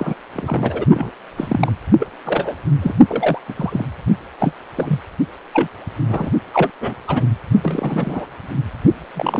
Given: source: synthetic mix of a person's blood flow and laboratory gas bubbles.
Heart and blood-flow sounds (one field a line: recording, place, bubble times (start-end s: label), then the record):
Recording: Doppler ultrasound of blood flow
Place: precordium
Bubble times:
0.00-0.14 s: bubbles
0.35-0.86 s: bubbles
0.89-1.11 s: bubbles
1.37-1.72 s: bubbles
1.99-2.08 s: bubbles
2.25-2.55 s: bubbles
2.81-2.94 s: bubbles
3.08-3.39 s: bubbles
3.48-3.86 s: bubbles
4.39-4.54 s: bubbles
4.76-5.00 s: bubbles
5.53-5.68 s: bubbles
6.08-6.30 s: bubbles
6.53-6.71 s: bubbles
6.80-6.94 s: bubbles
7.08-7.26 s: bubbles
7.63-8.26 s: bubbles
9.13-9.40 s: bubbles
From the record:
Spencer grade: 3 (all of the cardiac periods contain showers or single bubble signals, but not dominating or overriding the cardiac motion signals)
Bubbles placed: only in the low amplitude regions of the cardiac cycle